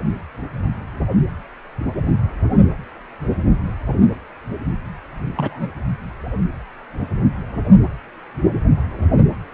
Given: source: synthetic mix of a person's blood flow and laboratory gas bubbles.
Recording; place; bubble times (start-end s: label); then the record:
Doppler ultrasound of blood flow; precordium
5.36-5.69 s: bubbles
From the record:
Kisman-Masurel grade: 112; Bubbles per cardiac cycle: 1 to 2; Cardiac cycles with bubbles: 1 to 10%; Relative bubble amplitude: moderate (0.250 to 0.450); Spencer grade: 1 (occasional bubble signal discernible with the cardiac motion signal, with majority of cardiac periods free of bubbles); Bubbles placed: anywhere in the cardiac cycle